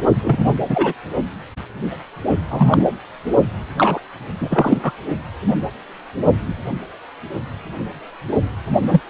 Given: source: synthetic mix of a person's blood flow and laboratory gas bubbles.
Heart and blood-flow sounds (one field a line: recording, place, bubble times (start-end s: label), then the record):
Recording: Doppler ultrasound of blood flow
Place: precordium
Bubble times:
0.22-0.45 s: bubbles
0.70-0.93 s: bubbles
2.50-2.85 s: bubbles
3.77-3.99 s: bubbles
4.40-4.79 s: bubbles
4.82-4.92 s: bubbles
8.88-9.01 s: bubbles
From the record:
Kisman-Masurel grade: 223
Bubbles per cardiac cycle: several, 3 to 8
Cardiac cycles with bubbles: 10 to 50%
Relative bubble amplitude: loud (0.450 to 0.775)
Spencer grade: 2 (many but less than half of the cardiac periods contain bubble signals, singularly or in groups)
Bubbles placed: only in the low amplitude regions of the cardiac cycle